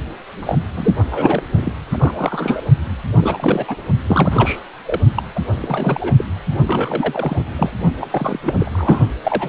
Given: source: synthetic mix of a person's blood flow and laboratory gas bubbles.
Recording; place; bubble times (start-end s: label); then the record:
Doppler ultrasound of blood flow; precordium
0.40-0.57 s: bubbles
0.76-0.94 s: bubbles
1.10-1.42 s: bubbles
1.57-1.72 s: bubbles
1.91-2.66 s: bubbles
3.21-3.76 s: bubbles
4.06-4.61 s: bubbles
4.85-5.00 s: bubbles
5.17-5.22 s: bubbles
5.35-5.40 s: bubbles
5.61-6.14 s: bubbles
6.17-6.25 s: bubbles
6.67-7.43 s: bubbles
7.56-7.71 s: bubbles
8.00-8.06 s: bubbles
8.11-8.39 s: bubbles
8.43-8.54 s: bubbles
8.59-9.03 s: bubbles
9.23-9.49 s: bubbles
From the record:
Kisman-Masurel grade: 342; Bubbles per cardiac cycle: rolling drumbeat, 9 or more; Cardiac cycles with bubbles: 100%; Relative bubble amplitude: moderate (0.250 to 0.450); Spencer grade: 3 (all of the cardiac periods contain showers or single bubble signals, but not dominating or overriding the cardiac motion signals); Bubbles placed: only in the low amplitude regions of the cardiac cycle